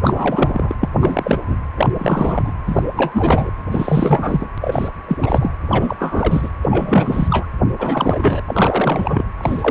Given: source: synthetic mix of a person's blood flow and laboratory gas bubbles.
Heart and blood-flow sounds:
Doppler ultrasound of blood flow; precordium
0.02-0.75 s: bubbles
0.80-0.89 s: bubbles
0.99-1.41 s: bubbles
1.48-1.57 s: bubbles
1.77-1.90 s: bubbles
1.98-2.52 s: bubbles
2.67-2.83 s: bubbles
2.96-3.52 s: bubbles
3.71-4.48 s: bubbles
4.61-4.88 s: bubbles
5.07-5.53 s: bubbles
5.63-5.96 s: bubbles
5.98-6.49 s: bubbles
6.62-7.46 s: bubbles
7.78-8.42 s: bubbles
8.47-9.25 s: bubbles
9.37-9.71 s: bubbles
From the record:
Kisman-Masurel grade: 343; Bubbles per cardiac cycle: rolling drumbeat, 9 or more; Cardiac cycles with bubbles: 100%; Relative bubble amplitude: loud (0.450 to 0.775); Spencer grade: 3 (all of the cardiac periods contain showers or single bubble signals, but not dominating or overriding the cardiac motion signals); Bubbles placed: anywhere in the cardiac cycle

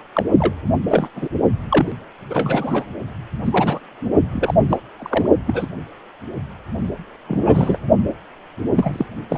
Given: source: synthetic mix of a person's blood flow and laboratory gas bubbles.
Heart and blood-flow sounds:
Doppler ultrasound of blood flow; precordium
0.14-0.24 s: bubbles
0.38-0.53 s: bubbles
0.88-1.08 s: bubbles
1.16-1.28 s: bubbles
1.69-1.92 s: bubbles
2.30-2.85 s: bubbles
3.44-3.81 s: bubbles
4.33-4.54 s: bubbles
4.69-4.77 s: bubbles
4.98-5.29 s: bubbles
5.46-5.66 s: bubbles
7.27-7.79 s: bubbles
8.74-9.05 s: bubbles
9.29-9.38 s: bubbles
From the record:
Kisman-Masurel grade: 242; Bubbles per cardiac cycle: several, 3 to 8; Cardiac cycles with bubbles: 100%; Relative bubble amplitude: moderate (0.250 to 0.450); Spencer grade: 3 (all of the cardiac periods contain showers or single bubble signals, but not dominating or overriding the cardiac motion signals); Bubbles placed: only in the low amplitude regions of the cardiac cycle

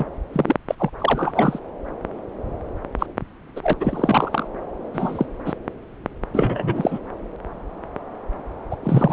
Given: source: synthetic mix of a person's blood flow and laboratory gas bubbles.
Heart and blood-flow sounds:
Doppler ultrasound of blood flow; subclavian vein
0.00-0.04 s: bubbles
0.32-0.56 s: bubbles
0.68-0.75 s: bubbles
0.79-0.90 s: bubbles
0.99-1.59 s: bubbles
2.98-3.06 s: bubbles
3.56-3.74 s: bubbles
3.80-4.47 s: bubbles
4.94-5.26 s: bubbles
5.46-5.54 s: bubbles
6.33-7.00 s: bubbles
8.71-8.76 s: bubbles
8.83-9.13 s: bubbles
From the record:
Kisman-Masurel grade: 232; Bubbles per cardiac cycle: several, 3 to 8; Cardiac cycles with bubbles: 50 to 99%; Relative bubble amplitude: moderate (0.250 to 0.450); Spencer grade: 3 (all of the cardiac periods contain showers or single bubble signals, but not dominating or overriding the cardiac motion signals); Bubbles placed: anywhere in the cardiac cycle

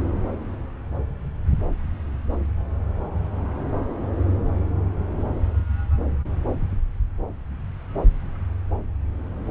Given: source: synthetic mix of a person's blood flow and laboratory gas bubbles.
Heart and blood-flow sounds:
Doppler ultrasound of blood flow; subclavian vein
no bubbles
From the record:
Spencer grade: 0 (complete lack of bubble signals)

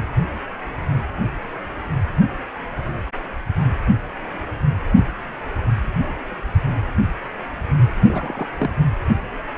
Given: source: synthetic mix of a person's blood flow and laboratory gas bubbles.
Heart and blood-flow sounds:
Doppler ultrasound of blood flow; precordium
8.01-8.49 s: bubbles
8.57-8.71 s: bubbles
From the record:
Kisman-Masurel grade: 211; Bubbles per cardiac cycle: several, 3 to 8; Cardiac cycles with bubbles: 1 to 10%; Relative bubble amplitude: barely perceptible (0.100 to 0.250); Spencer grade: 1 (occasional bubble signal discernible with the cardiac motion signal, with majority of cardiac periods free of bubbles); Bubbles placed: anywhere in the cardiac cycle

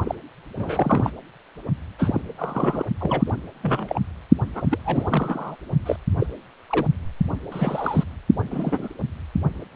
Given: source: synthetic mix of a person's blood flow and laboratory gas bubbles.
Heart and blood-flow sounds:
Doppler ultrasound of blood flow; precordium
0.05-0.15 s: bubbles
0.58-1.11 s: bubbles
1.99-2.22 s: bubbles
2.38-2.85 s: bubbles
3.00-3.24 s: bubbles
3.27-3.33 s: bubbles
3.62-4.01 s: bubbles
4.55-4.62 s: bubbles
4.70-4.78 s: bubbles
4.83-5.55 s: bubbles
5.85-5.96 s: bubbles
6.18-6.26 s: bubbles
6.69-6.86 s: bubbles
7.51-8.04 s: bubbles
8.51-8.88 s: bubbles
From the record:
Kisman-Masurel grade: 242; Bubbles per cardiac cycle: several, 3 to 8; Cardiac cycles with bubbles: 100%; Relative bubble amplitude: moderate (0.250 to 0.450); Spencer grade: 3 (all of the cardiac periods contain showers or single bubble signals, but not dominating or overriding the cardiac motion signals); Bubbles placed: only in the low amplitude regions of the cardiac cycle

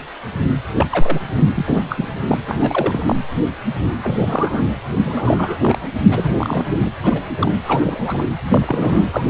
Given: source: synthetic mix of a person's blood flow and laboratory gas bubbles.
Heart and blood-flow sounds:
Doppler ultrasound of blood flow; precordium
0.76-0.86 s: bubbles
0.92-1.21 s: bubbles
1.55-1.84 s: bubbles
1.90-2.08 s: bubbles
2.28-2.38 s: bubbles
2.47-3.15 s: bubbles
4.03-4.63 s: bubbles
4.98-5.78 s: bubbles
6.04-6.65 s: bubbles
6.79-6.88 s: bubbles
7.02-7.21 s: bubbles
7.38-7.51 s: bubbles
7.64-8.24 s: bubbles
8.52-9.07 s: bubbles
9.12-9.30 s: bubbles
From the record:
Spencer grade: 3 (all of the cardiac periods contain showers or single bubble signals, but not dominating or overriding the cardiac motion signals); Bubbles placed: anywhere in the cardiac cycle

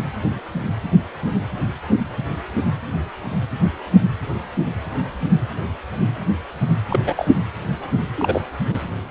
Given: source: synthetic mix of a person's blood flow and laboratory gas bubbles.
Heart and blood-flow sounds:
Doppler ultrasound of blood flow; precordium
6.89-7.00 s: bubbles
7.06-7.14 s: bubbles
7.17-7.29 s: bubbles
8.16-8.41 s: bubbles
8.71-8.80 s: bubbles
From the record:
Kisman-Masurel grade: 222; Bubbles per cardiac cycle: several, 3 to 8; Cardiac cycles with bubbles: 10 to 50%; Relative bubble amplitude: moderate (0.250 to 0.450); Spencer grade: 2 (many but less than half of the cardiac periods contain bubble signals, singularly or in groups); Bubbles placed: anywhere in the cardiac cycle

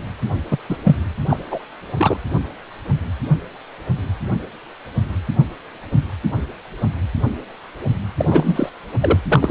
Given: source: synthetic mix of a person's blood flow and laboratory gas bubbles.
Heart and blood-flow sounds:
Doppler ultrasound of blood flow; precordium
0.50-0.58 s: bubbles
0.69-0.76 s: bubbles
0.83-0.95 s: bubbles
1.29-1.37 s: bubbles
1.50-1.60 s: bubbles
1.97-2.17 s: bubbles
8.18-8.70 s: bubbles
9.01-9.20 s: bubbles
9.29-9.51 s: bubbles
From the record:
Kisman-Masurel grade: 223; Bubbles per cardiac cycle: several, 3 to 8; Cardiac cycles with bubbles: 10 to 50%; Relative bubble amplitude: loud (0.450 to 0.775); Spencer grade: 2 (many but less than half of the cardiac periods contain bubble signals, singularly or in groups); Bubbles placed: anywhere in the cardiac cycle

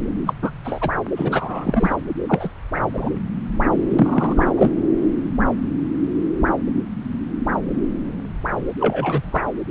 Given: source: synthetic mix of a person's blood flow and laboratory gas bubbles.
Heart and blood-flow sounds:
Doppler ultrasound of blood flow; subclavian vein
0.26-0.33 s: bubbles
0.42-0.51 s: bubbles
0.64-0.90 s: bubbles
1.16-1.96 s: bubbles
2.28-2.49 s: bubbles
2.93-3.10 s: bubbles
3.89-4.52 s: bubbles
4.56-4.72 s: bubbles
8.79-9.44 s: bubbles
From the record:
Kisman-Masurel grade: 233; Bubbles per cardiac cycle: several, 3 to 8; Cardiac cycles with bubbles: 50 to 99%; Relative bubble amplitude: loud (0.450 to 0.775); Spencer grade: 3 (all of the cardiac periods contain showers or single bubble signals, but not dominating or overriding the cardiac motion signals); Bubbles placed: anywhere in the cardiac cycle

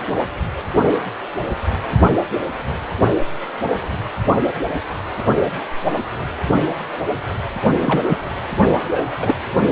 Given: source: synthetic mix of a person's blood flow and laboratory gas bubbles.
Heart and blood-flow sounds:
Doppler ultrasound of blood flow; precordium
7.82-8.19 s: bubbles
8.94-9.02 s: bubbles
9.20-9.35 s: bubbles
From the record:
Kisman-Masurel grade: 222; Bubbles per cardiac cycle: several, 3 to 8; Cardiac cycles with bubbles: 10 to 50%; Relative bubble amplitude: moderate (0.250 to 0.450); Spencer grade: 2 (many but less than half of the cardiac periods contain bubble signals, singularly or in groups); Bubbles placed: only in the low amplitude regions of the cardiac cycle

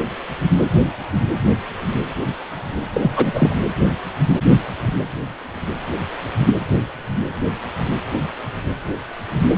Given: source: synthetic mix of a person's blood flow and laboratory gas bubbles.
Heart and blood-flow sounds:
Doppler ultrasound of blood flow; precordium
2.93-3.11 s: bubbles
3.16-3.54 s: bubbles
From the record:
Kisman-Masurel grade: 213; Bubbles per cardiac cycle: several, 3 to 8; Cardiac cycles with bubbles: 1 to 10%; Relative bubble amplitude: loud (0.450 to 0.775); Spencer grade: 1 (occasional bubble signal discernible with the cardiac motion signal, with majority of cardiac periods free of bubbles); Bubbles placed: anywhere in the cardiac cycle

